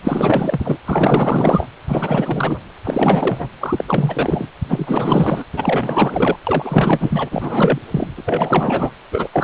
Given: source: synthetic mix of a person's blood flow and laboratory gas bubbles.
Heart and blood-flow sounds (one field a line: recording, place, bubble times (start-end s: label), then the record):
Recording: Doppler ultrasound of blood flow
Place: precordium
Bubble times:
0.03-0.77 s: bubbles
0.85-1.67 s: bubbles
1.88-2.61 s: bubbles
2.84-3.48 s: bubbles
3.60-3.85 s: bubbles
3.87-4.48 s: bubbles
4.69-5.45 s: bubbles
5.53-6.37 s: bubbles
6.47-7.79 s: bubbles
7.91-8.07 s: bubbles
8.16-8.91 s: bubbles
9.12-9.29 s: bubbles
9.32-9.44 s: bubbles
From the record:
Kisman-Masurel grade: 444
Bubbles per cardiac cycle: continuous sound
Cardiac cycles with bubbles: 100%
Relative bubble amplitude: maximal (0.775 to 0.999)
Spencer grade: 4 (maximum detectable bubble signal sounding continuously throughout systole and diastole of every cardiac period, and overriding the amplitude of the normal cardiac signals)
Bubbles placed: anywhere in the cardiac cycle